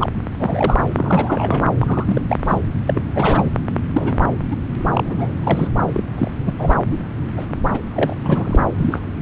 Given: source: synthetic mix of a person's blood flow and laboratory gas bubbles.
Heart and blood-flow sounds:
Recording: Doppler ultrasound of blood flow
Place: subclavian vein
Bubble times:
0.00-0.10 s: bubbles
0.39-0.85 s: bubbles
0.95-1.72 s: bubbles
1.80-2.22 s: bubbles
2.29-2.37 s: bubbles
2.44-2.61 s: bubbles
2.88-3.02 s: bubbles
3.15-3.49 s: bubbles
3.93-4.25 s: bubbles
4.51-4.56 s: bubbles
4.92-5.33 s: bubbles
5.43-5.68 s: bubbles
5.76-5.83 s: bubbles
5.92-6.03 s: bubbles
6.17-6.31 s: bubbles
6.45-6.55 s: bubbles
6.58-6.76 s: bubbles
6.90-6.98 s: bubbles
7.37-7.46 s: bubbles
7.74-7.79 s: bubbles
7.94-8.15 s: bubbles
8.25-8.56 s: bubbles
8.78-9.16 s: bubbles
From the record:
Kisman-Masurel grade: 242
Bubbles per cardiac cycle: several, 3 to 8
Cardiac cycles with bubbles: 100%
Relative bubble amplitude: moderate (0.250 to 0.450)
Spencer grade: 3 (all of the cardiac periods contain showers or single bubble signals, but not dominating or overriding the cardiac motion signals)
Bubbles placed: anywhere in the cardiac cycle

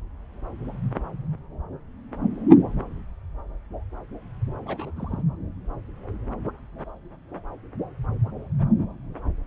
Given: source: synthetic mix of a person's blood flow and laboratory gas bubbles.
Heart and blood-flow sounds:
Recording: Doppler ultrasound of blood flow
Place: subclavian vein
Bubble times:
4.66-4.92 s: bubbles
4.96-5.22 s: bubbles
From the record:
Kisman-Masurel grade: 211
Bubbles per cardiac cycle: several, 3 to 8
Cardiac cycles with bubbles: 1 to 10%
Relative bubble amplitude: barely perceptible (0.100 to 0.250)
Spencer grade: 1 (occasional bubble signal discernible with the cardiac motion signal, with majority of cardiac periods free of bubbles)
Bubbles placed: anywhere in the cardiac cycle

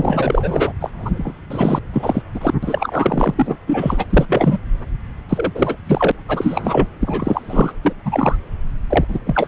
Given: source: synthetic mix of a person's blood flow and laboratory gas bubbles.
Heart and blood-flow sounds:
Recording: Doppler ultrasound of blood flow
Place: subclavian vein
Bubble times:
0.00-0.72 s: bubbles
0.80-1.41 s: bubbles
1.50-1.79 s: bubbles
1.92-2.22 s: bubbles
2.33-2.54 s: bubbles
2.62-3.57 s: bubbles
3.67-4.04 s: bubbles
4.09-4.59 s: bubbles
5.29-5.52 s: bubbles
5.54-5.78 s: bubbles
5.87-6.12 s: bubbles
6.28-6.87 s: bubbles
7.00-7.73 s: bubbles
7.84-7.93 s: bubbles
8.05-8.36 s: bubbles
8.89-9.05 s: bubbles
9.08-9.20 s: bubbles
9.26-9.48 s: bubbles
From the record:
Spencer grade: 3 (all of the cardiac periods contain showers or single bubble signals, but not dominating or overriding the cardiac motion signals)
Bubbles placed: anywhere in the cardiac cycle

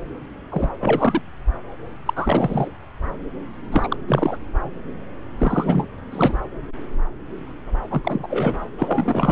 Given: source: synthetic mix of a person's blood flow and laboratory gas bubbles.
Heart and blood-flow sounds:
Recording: Doppler ultrasound of blood flow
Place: subclavian vein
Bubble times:
0.50-0.70 s: bubbles
0.80-1.21 s: bubbles
2.06-2.68 s: bubbles
3.71-3.96 s: bubbles
4.08-4.38 s: bubbles
5.39-5.87 s: bubbles
6.11-6.37 s: bubbles
7.91-8.55 s: bubbles
8.77-9.32 s: bubbles
From the record:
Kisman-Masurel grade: 333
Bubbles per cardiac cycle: rolling drumbeat, 9 or more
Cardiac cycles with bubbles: 50 to 99%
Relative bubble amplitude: loud (0.450 to 0.775)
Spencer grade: 3 (all of the cardiac periods contain showers or single bubble signals, but not dominating or overriding the cardiac motion signals)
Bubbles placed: anywhere in the cardiac cycle

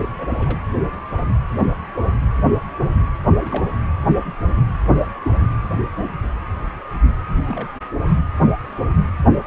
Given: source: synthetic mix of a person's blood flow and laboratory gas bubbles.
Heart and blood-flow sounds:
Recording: Doppler ultrasound of blood flow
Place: precordium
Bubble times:
0.00-0.09 s: bubbles
0.18-0.59 s: bubbles
3.39-3.67 s: bubbles
3.69-3.71 s: bubbles
7.46-7.74 s: bubbles
From the record:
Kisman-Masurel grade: 221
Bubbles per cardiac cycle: several, 3 to 8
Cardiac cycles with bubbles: 10 to 50%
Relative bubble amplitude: barely perceptible (0.100 to 0.250)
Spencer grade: 2 (many but less than half of the cardiac periods contain bubble signals, singularly or in groups)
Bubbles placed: anywhere in the cardiac cycle

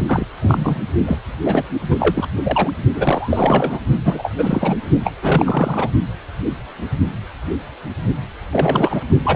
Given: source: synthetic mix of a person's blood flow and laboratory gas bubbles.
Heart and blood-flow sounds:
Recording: Doppler ultrasound of blood flow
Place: precordium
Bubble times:
0.08-0.27 s: bubbles
0.40-0.82 s: bubbles
1.05-1.21 s: bubbles
1.45-1.63 s: bubbles
1.90-1.96 s: bubbles
1.99-2.26 s: bubbles
2.43-2.71 s: bubbles
2.94-3.80 s: bubbles
4.04-4.32 s: bubbles
4.38-4.79 s: bubbles
5.04-5.12 s: bubbles
5.22-5.90 s: bubbles
8.52-9.04 s: bubbles
9.23-9.35 s: bubbles
From the record:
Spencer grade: 3 (all of the cardiac periods contain showers or single bubble signals, but not dominating or overriding the cardiac motion signals)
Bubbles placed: only in the low amplitude regions of the cardiac cycle

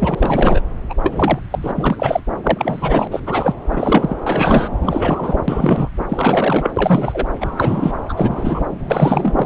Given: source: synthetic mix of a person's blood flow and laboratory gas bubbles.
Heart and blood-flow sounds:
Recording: Doppler ultrasound of blood flow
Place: subclavian vein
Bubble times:
0.00-0.60 s: bubbles
0.89-0.95 s: bubbles
1.03-1.39 s: bubbles
1.51-1.71 s: bubbles
1.75-2.21 s: bubbles
2.43-3.08 s: bubbles
3.11-3.21 s: bubbles
3.26-3.56 s: bubbles
3.71-4.15 s: bubbles
4.26-4.68 s: bubbles
4.81-5.37 s: bubbles
5.48-5.89 s: bubbles
6.08-6.70 s: bubbles
6.76-7.27 s: bubbles
7.40-7.92 s: bubbles
8.09-8.13 s: bubbles
8.17-8.62 s: bubbles
8.79-9.34 s: bubbles
9.37-9.46 s: bubbles
From the record:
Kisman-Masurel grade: 343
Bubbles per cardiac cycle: rolling drumbeat, 9 or more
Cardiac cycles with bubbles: 100%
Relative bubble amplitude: loud (0.450 to 0.775)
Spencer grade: 3 (all of the cardiac periods contain showers or single bubble signals, but not dominating or overriding the cardiac motion signals)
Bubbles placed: anywhere in the cardiac cycle

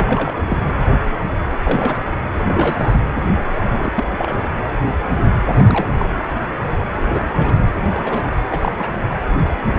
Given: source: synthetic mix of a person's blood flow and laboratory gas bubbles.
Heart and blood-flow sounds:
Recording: Doppler ultrasound of blood flow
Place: precordium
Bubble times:
0.00-0.42 s: bubbles
0.49-0.58 s: bubbles
1.64-2.03 s: bubbles
2.34-2.44 s: bubbles
2.48-3.02 s: bubbles
3.56-3.69 s: bubbles
3.71-4.04 s: bubbles
4.17-4.43 s: bubbles
5.53-5.87 s: bubbles
5.97-6.08 s: bubbles
7.01-7.28 s: bubbles
7.34-7.67 s: bubbles
7.95-8.30 s: bubbles
8.49-8.96 s: bubbles
From the record:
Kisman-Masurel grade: 232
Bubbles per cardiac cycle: several, 3 to 8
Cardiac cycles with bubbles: 50 to 99%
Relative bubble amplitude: moderate (0.250 to 0.450)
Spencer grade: 3 (all of the cardiac periods contain showers or single bubble signals, but not dominating or overriding the cardiac motion signals)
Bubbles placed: anywhere in the cardiac cycle

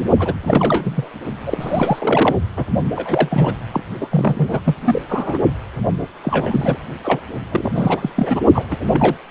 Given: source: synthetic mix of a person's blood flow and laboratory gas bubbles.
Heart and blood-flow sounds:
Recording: Doppler ultrasound of blood flow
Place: precordium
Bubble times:
0.19-0.34 s: bubbles
0.42-1.09 s: bubbles
1.46-2.36 s: bubbles
2.56-2.65 s: bubbles
2.96-3.54 s: bubbles
3.73-3.83 s: bubbles
4.00-4.08 s: bubbles
4.11-4.61 s: bubbles
4.64-4.75 s: bubbles
4.84-5.01 s: bubbles
5.08-5.38 s: bubbles
6.00-6.07 s: bubbles
6.23-6.77 s: bubbles
7.03-7.20 s: bubbles
7.51-8.10 s: bubbles
8.16-8.40 s: bubbles
8.54-8.63 s: bubbles
8.71-9.15 s: bubbles
From the record:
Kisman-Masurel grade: 332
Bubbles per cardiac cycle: rolling drumbeat, 9 or more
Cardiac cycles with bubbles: 50 to 99%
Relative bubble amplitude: moderate (0.250 to 0.450)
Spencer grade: 3 (all of the cardiac periods contain showers or single bubble signals, but not dominating or overriding the cardiac motion signals)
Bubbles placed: only in the low amplitude regions of the cardiac cycle

